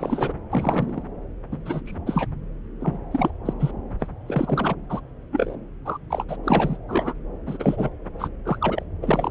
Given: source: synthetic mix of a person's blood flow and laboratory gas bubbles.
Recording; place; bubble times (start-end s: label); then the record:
Doppler ultrasound of blood flow; subclavian vein
0.00-0.33 s: bubbles
0.52-1.02 s: bubbles
1.52-1.56 s: bubbles
1.65-1.80 s: bubbles
1.86-1.98 s: bubbles
2.06-2.27 s: bubbles
2.79-2.98 s: bubbles
3.11-3.31 s: bubbles
3.45-3.53 s: bubbles
3.60-3.71 s: bubbles
3.99-4.07 s: bubbles
4.27-4.75 s: bubbles
4.90-5.00 s: bubbles
5.33-5.56 s: bubbles
5.85-5.98 s: bubbles
6.10-6.24 s: bubbles
6.29-6.36 s: bubbles
6.44-6.77 s: bubbles
6.89-7.14 s: bubbles
7.47-7.90 s: bubbles
8.18-8.27 s: bubbles
8.46-8.58 s: bubbles
8.61-8.83 s: bubbles
9.02-9.31 s: bubbles
From the record:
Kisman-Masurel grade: 242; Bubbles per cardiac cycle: several, 3 to 8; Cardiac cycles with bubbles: 100%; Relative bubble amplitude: moderate (0.250 to 0.450); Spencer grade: 3 (all of the cardiac periods contain showers or single bubble signals, but not dominating or overriding the cardiac motion signals); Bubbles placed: anywhere in the cardiac cycle